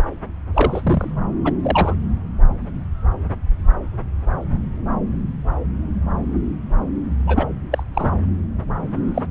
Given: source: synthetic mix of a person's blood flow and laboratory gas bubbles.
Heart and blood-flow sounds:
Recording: Doppler ultrasound of blood flow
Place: subclavian vein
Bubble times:
0.53-1.10 s: bubbles
1.45-1.53 s: bubbles
1.62-1.95 s: bubbles
7.26-7.47 s: bubbles
7.71-7.83 s: bubbles
7.93-8.11 s: bubbles
9.14-9.26 s: bubbles
From the record:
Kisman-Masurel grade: 222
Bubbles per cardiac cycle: several, 3 to 8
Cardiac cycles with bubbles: 10 to 50%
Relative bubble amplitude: moderate (0.250 to 0.450)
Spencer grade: 2 (many but less than half of the cardiac periods contain bubble signals, singularly or in groups)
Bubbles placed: anywhere in the cardiac cycle

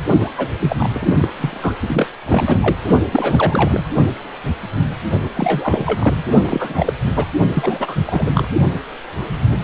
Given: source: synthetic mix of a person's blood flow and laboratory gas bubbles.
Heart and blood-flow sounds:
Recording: Doppler ultrasound of blood flow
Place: precordium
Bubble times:
0.19-0.31 s: bubbles
0.37-0.48 s: bubbles
0.59-0.89 s: bubbles
0.93-1.28 s: bubbles
1.38-1.73 s: bubbles
1.87-2.07 s: bubbles
2.25-2.75 s: bubbles
3.11-3.84 s: bubbles
5.36-6.23 s: bubbles
6.43-6.93 s: bubbles
6.99-7.25 s: bubbles
7.54-7.96 s: bubbles
8.07-8.30 s: bubbles
8.34-8.47 s: bubbles
From the record:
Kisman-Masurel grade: 332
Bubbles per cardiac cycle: rolling drumbeat, 9 or more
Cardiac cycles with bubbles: 50 to 99%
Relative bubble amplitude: moderate (0.250 to 0.450)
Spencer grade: 3 (all of the cardiac periods contain showers or single bubble signals, but not dominating or overriding the cardiac motion signals)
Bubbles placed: only in the low amplitude regions of the cardiac cycle

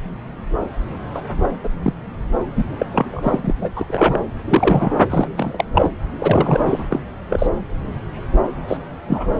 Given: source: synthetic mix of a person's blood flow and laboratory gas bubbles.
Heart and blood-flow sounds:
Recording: Doppler ultrasound of blood flow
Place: subclavian vein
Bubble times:
1.15-1.23 s: bubbles
1.63-1.69 s: bubbles
1.83-1.94 s: bubbles
2.56-2.65 s: bubbles
2.79-2.86 s: bubbles
2.92-3.53 s: bubbles
3.61-3.69 s: bubbles
3.75-4.19 s: bubbles
4.48-4.94 s: bubbles
5.09-5.28 s: bubbles
5.36-5.65 s: bubbles
5.74-5.89 s: bubbles
6.19-6.88 s: bubbles
6.90-6.99 s: bubbles
7.29-7.47 s: bubbles
8.68-8.77 s: bubbles
9.07-9.40 s: bubbles
From the record:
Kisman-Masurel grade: 233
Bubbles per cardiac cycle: several, 3 to 8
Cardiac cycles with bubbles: 50 to 99%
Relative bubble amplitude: loud (0.450 to 0.775)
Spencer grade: 3 (all of the cardiac periods contain showers or single bubble signals, but not dominating or overriding the cardiac motion signals)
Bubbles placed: anywhere in the cardiac cycle

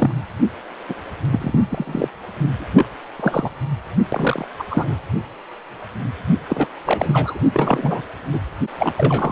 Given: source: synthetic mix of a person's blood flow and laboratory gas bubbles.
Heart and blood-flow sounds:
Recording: Doppler ultrasound of blood flow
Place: precordium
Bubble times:
0.00-0.22 s: bubbles
0.89-0.95 s: bubbles
1.31-1.65 s: bubbles
1.70-2.08 s: bubbles
2.58-2.87 s: bubbles
3.19-3.50 s: bubbles
4.12-4.47 s: bubbles
4.58-4.63 s: bubbles
4.70-4.97 s: bubbles
6.49-6.68 s: bubbles
6.85-7.39 s: bubbles
7.53-8.02 s: bubbles
8.33-8.39 s: bubbles
8.79-8.93 s: bubbles
8.97-9.32 s: bubbles
From the record:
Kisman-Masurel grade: 332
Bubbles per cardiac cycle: rolling drumbeat, 9 or more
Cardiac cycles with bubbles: 50 to 99%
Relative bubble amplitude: moderate (0.250 to 0.450)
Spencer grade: 3 (all of the cardiac periods contain showers or single bubble signals, but not dominating or overriding the cardiac motion signals)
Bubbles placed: anywhere in the cardiac cycle

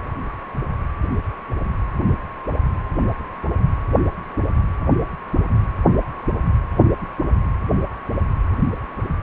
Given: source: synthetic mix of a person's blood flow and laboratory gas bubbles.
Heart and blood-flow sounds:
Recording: Doppler ultrasound of blood flow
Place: precordium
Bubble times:
no bubbles
From the record:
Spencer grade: 0 (complete lack of bubble signals)

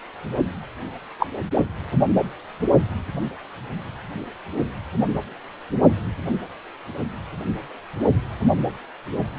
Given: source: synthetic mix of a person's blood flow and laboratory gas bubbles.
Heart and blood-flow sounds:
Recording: Doppler ultrasound of blood flow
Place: precordium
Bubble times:
1.19-1.27 s: bubbles
From the record:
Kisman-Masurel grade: 123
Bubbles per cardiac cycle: 1 to 2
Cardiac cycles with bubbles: 10 to 50%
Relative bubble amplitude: loud (0.450 to 0.775)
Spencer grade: 2 (many but less than half of the cardiac periods contain bubble signals, singularly or in groups)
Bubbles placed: only in the low amplitude regions of the cardiac cycle

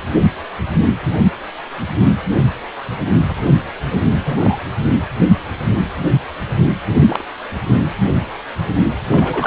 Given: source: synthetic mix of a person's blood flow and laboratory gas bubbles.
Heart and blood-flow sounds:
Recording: Doppler ultrasound of blood flow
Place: precordium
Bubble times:
3.28-3.34 s: bubbles
3.45-3.56 s: bubbles
3.84-4.00 s: bubbles
4.25-4.58 s: bubbles
7.00-7.25 s: bubbles
9.10-9.47 s: bubbles
From the record:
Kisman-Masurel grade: 222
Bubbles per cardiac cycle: several, 3 to 8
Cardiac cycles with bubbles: 10 to 50%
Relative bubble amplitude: moderate (0.250 to 0.450)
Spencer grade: 2 (many but less than half of the cardiac periods contain bubble signals, singularly or in groups)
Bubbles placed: only in the low amplitude regions of the cardiac cycle

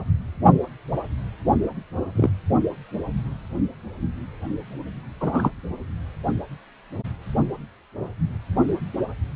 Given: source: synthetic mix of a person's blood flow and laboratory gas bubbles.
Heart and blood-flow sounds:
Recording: Doppler ultrasound of blood flow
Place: precordium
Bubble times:
2.15-2.30 s: bubbles
5.21-5.50 s: bubbles
From the record:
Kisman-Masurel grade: 122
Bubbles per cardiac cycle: 1 to 2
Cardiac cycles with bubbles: 10 to 50%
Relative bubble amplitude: moderate (0.250 to 0.450)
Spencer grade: 2 (many but less than half of the cardiac periods contain bubble signals, singularly or in groups)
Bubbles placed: only in the low amplitude regions of the cardiac cycle

